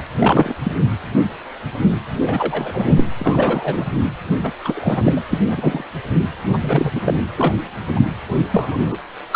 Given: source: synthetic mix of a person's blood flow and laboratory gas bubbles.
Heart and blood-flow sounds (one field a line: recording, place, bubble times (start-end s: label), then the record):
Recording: Doppler ultrasound of blood flow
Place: precordium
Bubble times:
0.18-0.55 s: bubbles
0.64-0.71 s: bubbles
2.23-3.04 s: bubbles
3.17-3.85 s: bubbles
4.43-4.53 s: bubbles
4.64-5.22 s: bubbles
5.29-5.38 s: bubbles
5.45-5.83 s: bubbles
6.53-6.91 s: bubbles
6.95-7.01 s: bubbles
7.04-7.22 s: bubbles
7.37-7.54 s: bubbles
7.96-8.00 s: bubbles
8.52-8.96 s: bubbles
9.32-9.36 s: bubbles
From the record:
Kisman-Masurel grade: 233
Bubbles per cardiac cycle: several, 3 to 8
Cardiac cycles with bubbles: 50 to 99%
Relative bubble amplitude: loud (0.450 to 0.775)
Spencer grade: 3 (all of the cardiac periods contain showers or single bubble signals, but not dominating or overriding the cardiac motion signals)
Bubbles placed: anywhere in the cardiac cycle